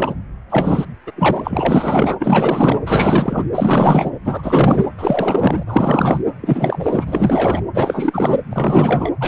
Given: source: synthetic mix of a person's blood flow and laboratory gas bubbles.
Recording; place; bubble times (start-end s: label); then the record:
Doppler ultrasound of blood flow; precordium
0.00-0.14 s: bubbles
0.50-0.85 s: bubbles
1.06-1.11 s: bubbles
1.16-2.80 s: bubbles
2.85-3.45 s: bubbles
3.54-4.11 s: bubbles
4.24-4.84 s: bubbles
4.97-5.63 s: bubbles
5.67-6.21 s: bubbles
6.40-7.61 s: bubbles
7.74-8.40 s: bubbles
8.50-9.11 s: bubbles
9.20-9.28 s: bubbles
From the record:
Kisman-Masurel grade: 444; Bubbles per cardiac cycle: continuous sound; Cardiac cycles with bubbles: 100%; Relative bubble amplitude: maximal (0.775 to 0.999); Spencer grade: 4 (maximum detectable bubble signal sounding continuously throughout systole and diastole of every cardiac period, and overriding the amplitude of the normal cardiac signals); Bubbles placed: anywhere in the cardiac cycle